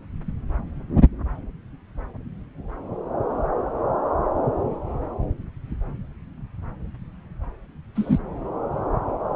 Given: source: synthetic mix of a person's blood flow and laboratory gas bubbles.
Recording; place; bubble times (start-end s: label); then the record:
Doppler ultrasound of blood flow; subclavian vein
7.95-8.18 s: bubbles
From the record:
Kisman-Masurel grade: 113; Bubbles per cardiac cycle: 1 to 2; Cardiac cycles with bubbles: 1 to 10%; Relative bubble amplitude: loud (0.450 to 0.775); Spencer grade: 1 (occasional bubble signal discernible with the cardiac motion signal, with majority of cardiac periods free of bubbles); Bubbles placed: anywhere in the cardiac cycle